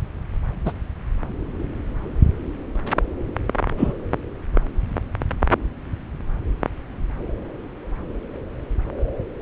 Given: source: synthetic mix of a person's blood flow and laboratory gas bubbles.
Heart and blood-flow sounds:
Doppler ultrasound of blood flow; subclavian vein
0.65-0.72 s: bubbles
3.77-3.93 s: bubbles
From the record:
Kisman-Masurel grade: 123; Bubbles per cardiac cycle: 1 to 2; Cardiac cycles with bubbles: 10 to 50%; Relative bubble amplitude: loud (0.450 to 0.775); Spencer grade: 2 (many but less than half of the cardiac periods contain bubble signals, singularly or in groups); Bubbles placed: anywhere in the cardiac cycle

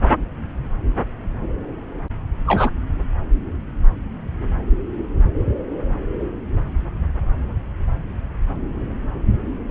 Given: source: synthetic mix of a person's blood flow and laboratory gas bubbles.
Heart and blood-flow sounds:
Doppler ultrasound of blood flow; subclavian vein
2.47-2.70 s: bubbles
From the record:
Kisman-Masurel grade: 213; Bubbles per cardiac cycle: several, 3 to 8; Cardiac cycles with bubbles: 1 to 10%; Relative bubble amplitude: loud (0.450 to 0.775); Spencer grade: 1 (occasional bubble signal discernible with the cardiac motion signal, with majority of cardiac periods free of bubbles); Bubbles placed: anywhere in the cardiac cycle

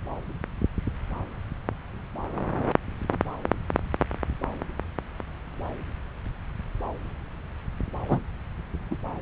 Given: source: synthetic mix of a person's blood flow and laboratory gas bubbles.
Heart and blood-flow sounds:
Doppler ultrasound of blood flow; subclavian vein
8.08-8.20 s: bubbles
8.91-8.96 s: bubbles
From the record:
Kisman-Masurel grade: 122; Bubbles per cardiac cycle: 1 to 2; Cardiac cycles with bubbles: 10 to 50%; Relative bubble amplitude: moderate (0.250 to 0.450); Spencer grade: 2 (many but less than half of the cardiac periods contain bubble signals, singularly or in groups); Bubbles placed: anywhere in the cardiac cycle

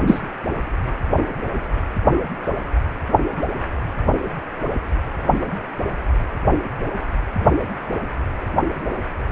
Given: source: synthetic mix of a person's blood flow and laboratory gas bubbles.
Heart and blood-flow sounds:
Doppler ultrasound of blood flow; precordium
0.07-0.21 s: bubbles
From the record:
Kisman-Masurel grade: 113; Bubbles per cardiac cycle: 1 to 2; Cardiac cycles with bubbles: 1 to 10%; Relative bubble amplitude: loud (0.450 to 0.775); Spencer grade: 1 (occasional bubble signal discernible with the cardiac motion signal, with majority of cardiac periods free of bubbles); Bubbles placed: anywhere in the cardiac cycle

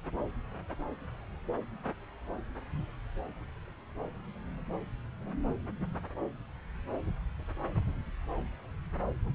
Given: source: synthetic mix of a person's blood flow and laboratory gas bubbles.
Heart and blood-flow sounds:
Doppler ultrasound of blood flow; subclavian vein
no bubbles
From the record:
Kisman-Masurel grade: 000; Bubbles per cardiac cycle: 0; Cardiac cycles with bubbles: 0%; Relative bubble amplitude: no bubbles discernible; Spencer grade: 0 (complete lack of bubble signals)

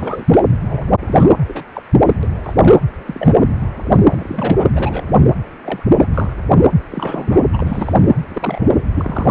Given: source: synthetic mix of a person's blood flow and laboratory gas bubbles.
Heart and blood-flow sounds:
Doppler ultrasound of blood flow; precordium
0.00-0.25 s: bubbles
0.28-0.41 s: bubbles
0.69-0.90 s: bubbles
1.06-1.33 s: bubbles
1.48-1.63 s: bubbles
1.74-1.83 s: bubbles
2.06-2.15 s: bubbles
2.23-2.27 s: bubbles
2.44-2.74 s: bubbles
3.06-3.52 s: bubbles
3.89-4.69 s: bubbles
4.75-5.27 s: bubbles
5.64-5.83 s: bubbles
5.98-6.08 s: bubbles
6.14-6.33 s: bubbles
6.58-6.68 s: bubbles
6.90-7.44 s: bubbles
7.53-7.92 s: bubbles
8.30-8.85 s: bubbles
8.94-9.31 s: bubbles
From the record:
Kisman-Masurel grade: 242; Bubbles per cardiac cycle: several, 3 to 8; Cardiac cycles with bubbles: 100%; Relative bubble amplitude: moderate (0.250 to 0.450); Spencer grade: 3 (all of the cardiac periods contain showers or single bubble signals, but not dominating or overriding the cardiac motion signals); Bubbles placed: anywhere in the cardiac cycle

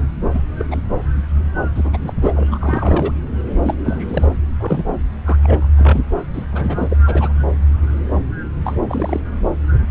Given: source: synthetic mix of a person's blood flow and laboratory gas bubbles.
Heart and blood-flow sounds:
Doppler ultrasound of blood flow; subclavian vein
0.33-0.41 s: bubbles
0.57-0.66 s: bubbles
0.71-0.77 s: bubbles
1.74-1.97 s: bubbles
2.02-2.47 s: bubbles
2.51-3.12 s: bubbles
3.62-3.75 s: bubbles
3.85-4.27 s: bubbles
4.60-4.84 s: bubbles
5.25-5.37 s: bubbles
5.43-5.67 s: bubbles
5.77-6.00 s: bubbles
6.33-6.46 s: bubbles
6.52-6.97 s: bubbles
7.06-7.32 s: bubbles
8.64-8.81 s: bubbles
8.88-9.20 s: bubbles
From the record:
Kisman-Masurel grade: 232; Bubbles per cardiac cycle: several, 3 to 8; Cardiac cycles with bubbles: 50 to 99%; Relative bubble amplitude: moderate (0.250 to 0.450); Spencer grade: 3 (all of the cardiac periods contain showers or single bubble signals, but not dominating or overriding the cardiac motion signals); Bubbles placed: anywhere in the cardiac cycle

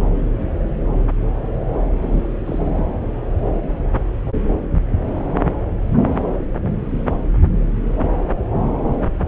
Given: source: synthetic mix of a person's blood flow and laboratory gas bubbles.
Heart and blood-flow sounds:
Doppler ultrasound of blood flow; subclavian vein
2.01-2.26 s: bubbles
2.46-2.71 s: bubbles
2.75-2.92 s: bubbles
From the record:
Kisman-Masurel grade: 222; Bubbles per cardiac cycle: several, 3 to 8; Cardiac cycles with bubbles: 10 to 50%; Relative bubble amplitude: moderate (0.250 to 0.450); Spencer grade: 2 (many but less than half of the cardiac periods contain bubble signals, singularly or in groups); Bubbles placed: anywhere in the cardiac cycle

